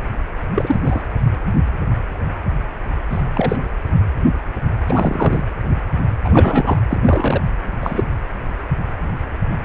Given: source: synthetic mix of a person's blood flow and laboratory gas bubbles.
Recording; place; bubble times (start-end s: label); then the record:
Doppler ultrasound of blood flow; precordium
0.55-0.80 s: bubbles
0.83-1.03 s: bubbles
3.10-3.23 s: bubbles
3.34-3.62 s: bubbles
4.87-5.42 s: bubbles
6.24-6.79 s: bubbles
6.90-6.98 s: bubbles
7.03-7.42 s: bubbles
7.82-8.04 s: bubbles
From the record:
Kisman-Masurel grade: 223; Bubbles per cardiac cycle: several, 3 to 8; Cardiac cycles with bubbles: 10 to 50%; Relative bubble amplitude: loud (0.450 to 0.775); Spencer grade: 2 (many but less than half of the cardiac periods contain bubble signals, singularly or in groups); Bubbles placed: anywhere in the cardiac cycle